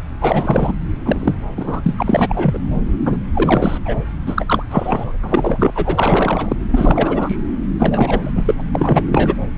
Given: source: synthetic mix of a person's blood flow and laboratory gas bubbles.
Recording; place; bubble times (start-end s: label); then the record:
Doppler ultrasound of blood flow; subclavian vein
0.20-0.72 s: bubbles
1.05-1.34 s: bubbles
1.57-1.95 s: bubbles
1.97-2.58 s: bubbles
3.05-3.17 s: bubbles
3.33-3.79 s: bubbles
3.85-3.95 s: bubbles
4.26-4.63 s: bubbles
4.70-5.13 s: bubbles
5.22-6.56 s: bubbles
6.71-7.37 s: bubbles
7.79-8.31 s: bubbles
8.35-8.61 s: bubbles
8.72-9.07 s: bubbles
9.12-9.33 s: bubbles
From the record:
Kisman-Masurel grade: 333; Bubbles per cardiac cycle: rolling drumbeat, 9 or more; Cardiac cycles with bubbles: 50 to 99%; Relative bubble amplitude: loud (0.450 to 0.775); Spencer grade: 3 (all of the cardiac periods contain showers or single bubble signals, but not dominating or overriding the cardiac motion signals); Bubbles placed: anywhere in the cardiac cycle